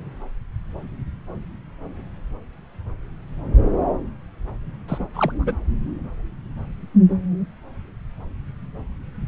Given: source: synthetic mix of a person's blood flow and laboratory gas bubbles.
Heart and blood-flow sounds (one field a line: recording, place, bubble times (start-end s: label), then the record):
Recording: Doppler ultrasound of blood flow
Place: subclavian vein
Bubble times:
4.88-5.07 s: bubbles
5.14-5.32 s: bubbles
5.39-5.56 s: bubbles
From the record:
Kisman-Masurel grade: 212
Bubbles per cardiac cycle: several, 3 to 8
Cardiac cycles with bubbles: 1 to 10%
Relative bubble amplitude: moderate (0.250 to 0.450)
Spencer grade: 1 (occasional bubble signal discernible with the cardiac motion signal, with majority of cardiac periods free of bubbles)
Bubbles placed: anywhere in the cardiac cycle